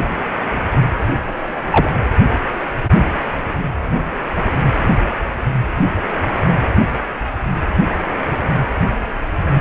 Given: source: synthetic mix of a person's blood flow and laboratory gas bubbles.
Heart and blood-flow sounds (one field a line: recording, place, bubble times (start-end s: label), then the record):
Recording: Doppler ultrasound of blood flow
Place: precordium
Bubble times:
1.07-1.12 s: bubbles
1.72-1.91 s: bubbles
From the record:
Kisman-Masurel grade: 113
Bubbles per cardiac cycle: 1 to 2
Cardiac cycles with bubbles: 1 to 10%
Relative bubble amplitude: loud (0.450 to 0.775)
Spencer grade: 1 (occasional bubble signal discernible with the cardiac motion signal, with majority of cardiac periods free of bubbles)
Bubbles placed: anywhere in the cardiac cycle